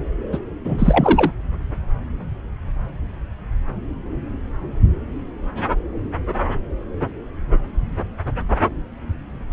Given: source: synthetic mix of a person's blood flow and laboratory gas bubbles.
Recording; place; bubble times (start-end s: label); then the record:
Doppler ultrasound of blood flow; subclavian vein
0.32-0.38 s: bubbles
0.64-1.31 s: bubbles
From the record:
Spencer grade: 2 (many but less than half of the cardiac periods contain bubble signals, singularly or in groups); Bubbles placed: anywhere in the cardiac cycle